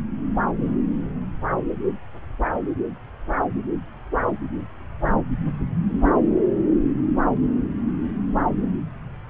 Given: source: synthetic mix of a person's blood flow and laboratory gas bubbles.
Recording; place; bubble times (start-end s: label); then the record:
Doppler ultrasound of blood flow; subclavian vein
no bubbles
From the record:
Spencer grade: 0 (complete lack of bubble signals)